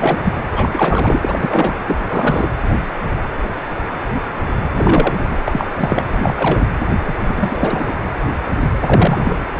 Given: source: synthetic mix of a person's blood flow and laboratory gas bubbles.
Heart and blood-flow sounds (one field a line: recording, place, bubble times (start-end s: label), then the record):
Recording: Doppler ultrasound of blood flow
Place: precordium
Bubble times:
0.00-0.33 s: bubbles
0.52-0.69 s: bubbles
0.72-1.77 s: bubbles
1.87-2.00 s: bubbles
2.09-2.49 s: bubbles
4.76-5.27 s: bubbles
5.29-5.38 s: bubbles
5.44-5.67 s: bubbles
5.78-6.05 s: bubbles
6.12-6.66 s: bubbles
7.05-7.13 s: bubbles
7.24-7.93 s: bubbles
8.86-9.38 s: bubbles
From the record:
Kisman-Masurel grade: 333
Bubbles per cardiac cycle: rolling drumbeat, 9 or more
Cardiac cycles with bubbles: 50 to 99%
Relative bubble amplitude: loud (0.450 to 0.775)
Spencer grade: 3 (all of the cardiac periods contain showers or single bubble signals, but not dominating or overriding the cardiac motion signals)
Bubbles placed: anywhere in the cardiac cycle